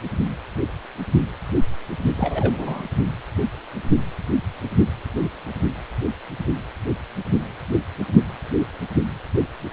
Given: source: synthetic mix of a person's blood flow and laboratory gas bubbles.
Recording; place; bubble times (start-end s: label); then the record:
Doppler ultrasound of blood flow; precordium
2.15-2.84 s: bubbles
From the record:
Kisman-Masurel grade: 212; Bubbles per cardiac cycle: several, 3 to 8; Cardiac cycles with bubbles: 1 to 10%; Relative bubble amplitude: moderate (0.250 to 0.450); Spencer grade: 1 (occasional bubble signal discernible with the cardiac motion signal, with majority of cardiac periods free of bubbles); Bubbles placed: only in the low amplitude regions of the cardiac cycle